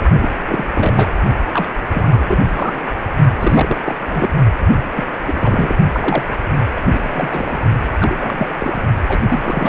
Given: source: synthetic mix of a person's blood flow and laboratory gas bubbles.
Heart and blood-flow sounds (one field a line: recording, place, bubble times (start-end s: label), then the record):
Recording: Doppler ultrasound of blood flow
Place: precordium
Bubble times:
0.19-0.29 s: bubbles
0.46-0.64 s: bubbles
0.73-1.14 s: bubbles
1.53-1.74 s: bubbles
1.93-2.80 s: bubbles
3.40-3.81 s: bubbles
3.85-3.96 s: bubbles
4.08-4.30 s: bubbles
4.59-4.67 s: bubbles
4.76-4.85 s: bubbles
4.96-5.04 s: bubbles
5.26-5.76 s: bubbles
5.93-6.23 s: bubbles
6.75-6.80 s: bubbles
6.93-7.58 s: bubbles
8.00-8.81 s: bubbles
9.08-9.20 s: bubbles
9.29-9.69 s: bubbles
From the record:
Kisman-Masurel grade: 342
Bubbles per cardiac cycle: rolling drumbeat, 9 or more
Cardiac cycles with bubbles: 100%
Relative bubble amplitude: moderate (0.250 to 0.450)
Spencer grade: 3 (all of the cardiac periods contain showers or single bubble signals, but not dominating or overriding the cardiac motion signals)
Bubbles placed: only in the low amplitude regions of the cardiac cycle